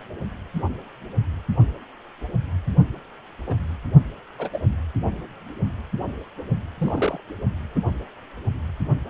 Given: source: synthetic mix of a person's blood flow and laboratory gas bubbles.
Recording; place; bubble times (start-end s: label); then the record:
Doppler ultrasound of blood flow; precordium
3.46-3.56 s: bubbles
4.38-4.49 s: bubbles
4.52-4.60 s: bubbles
6.77-7.21 s: bubbles
7.75-7.79 s: bubbles
From the record:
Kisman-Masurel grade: 121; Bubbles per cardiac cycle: 1 to 2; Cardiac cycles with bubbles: 10 to 50%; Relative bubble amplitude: barely perceptible (0.100 to 0.250); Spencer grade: 2 (many but less than half of the cardiac periods contain bubble signals, singularly or in groups); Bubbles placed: anywhere in the cardiac cycle